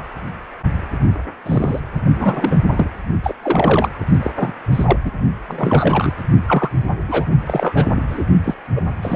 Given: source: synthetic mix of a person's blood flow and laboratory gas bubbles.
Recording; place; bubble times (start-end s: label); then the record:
Doppler ultrasound of blood flow; precordium
1.46-1.80 s: bubbles
2.15-2.60 s: bubbles
2.71-2.89 s: bubbles
3.23-3.34 s: bubbles
3.42-3.90 s: bubbles
4.22-4.30 s: bubbles
4.36-4.51 s: bubbles
4.72-4.97 s: bubbles
5.04-5.12 s: bubbles
5.48-6.13 s: bubbles
6.47-6.69 s: bubbles
7.08-7.25 s: bubbles
7.46-7.86 s: bubbles
7.95-8.24 s: bubbles
8.44-8.54 s: bubbles
8.75-8.82 s: bubbles
9.02-9.16 s: bubbles
From the record:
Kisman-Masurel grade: 233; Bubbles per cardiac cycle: several, 3 to 8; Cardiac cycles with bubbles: 50 to 99%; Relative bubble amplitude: loud (0.450 to 0.775); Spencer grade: 3 (all of the cardiac periods contain showers or single bubble signals, but not dominating or overriding the cardiac motion signals); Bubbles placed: only in the low amplitude regions of the cardiac cycle